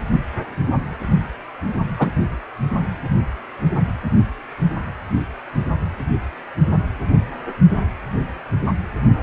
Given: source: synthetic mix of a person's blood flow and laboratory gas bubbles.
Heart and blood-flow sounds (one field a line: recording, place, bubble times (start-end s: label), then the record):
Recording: Doppler ultrasound of blood flow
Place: precordium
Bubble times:
1.99-2.10 s: bubbles
From the record:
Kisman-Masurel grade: 123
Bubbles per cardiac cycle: 1 to 2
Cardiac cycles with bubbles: 10 to 50%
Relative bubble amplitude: loud (0.450 to 0.775)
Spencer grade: 2 (many but less than half of the cardiac periods contain bubble signals, singularly or in groups)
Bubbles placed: anywhere in the cardiac cycle